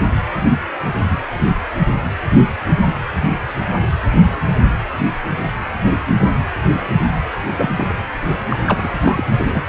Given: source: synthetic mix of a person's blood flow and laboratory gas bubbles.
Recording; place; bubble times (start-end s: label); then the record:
Doppler ultrasound of blood flow; precordium
7.57-7.97 s: bubbles
8.49-8.59 s: bubbles
8.68-8.94 s: bubbles
9.02-9.23 s: bubbles
9.38-9.62 s: bubbles
From the record:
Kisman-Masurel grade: 222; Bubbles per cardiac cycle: several, 3 to 8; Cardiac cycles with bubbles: 10 to 50%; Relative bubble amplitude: moderate (0.250 to 0.450); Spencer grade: 2 (many but less than half of the cardiac periods contain bubble signals, singularly or in groups); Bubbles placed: anywhere in the cardiac cycle